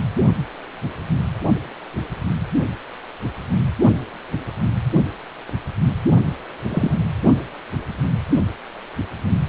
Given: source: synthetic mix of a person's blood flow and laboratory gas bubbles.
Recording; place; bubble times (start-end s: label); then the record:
Doppler ultrasound of blood flow; precordium
6.70-6.96 s: bubbles
From the record:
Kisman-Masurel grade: 122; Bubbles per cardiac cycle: 1 to 2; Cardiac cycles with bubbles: 10 to 50%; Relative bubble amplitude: moderate (0.250 to 0.450); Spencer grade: 2 (many but less than half of the cardiac periods contain bubble signals, singularly or in groups); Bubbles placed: anywhere in the cardiac cycle